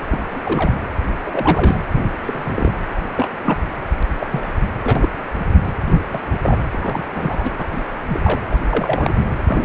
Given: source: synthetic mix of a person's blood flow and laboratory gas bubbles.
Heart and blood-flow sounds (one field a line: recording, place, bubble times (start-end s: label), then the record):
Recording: Doppler ultrasound of blood flow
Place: precordium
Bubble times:
0.12-0.18 s: bubbles
0.30-0.41 s: bubbles
0.45-0.81 s: bubbles
1.25-1.77 s: bubbles
1.95-2.09 s: bubbles
2.22-2.72 s: bubbles
3.16-3.28 s: bubbles
3.44-3.58 s: bubbles
4.20-4.27 s: bubbles
4.31-4.50 s: bubbles
4.83-5.09 s: bubbles
5.85-6.00 s: bubbles
6.10-6.21 s: bubbles
6.42-6.57 s: bubbles
6.71-7.04 s: bubbles
7.15-7.65 s: bubbles
7.72-7.82 s: bubbles
8.08-8.40 s: bubbles
8.51-8.59 s: bubbles
8.69-9.13 s: bubbles
9.46-9.65 s: bubbles
From the record:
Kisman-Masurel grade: 242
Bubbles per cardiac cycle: several, 3 to 8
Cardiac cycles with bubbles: 100%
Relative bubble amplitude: moderate (0.250 to 0.450)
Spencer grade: 3 (all of the cardiac periods contain showers or single bubble signals, but not dominating or overriding the cardiac motion signals)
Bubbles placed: anywhere in the cardiac cycle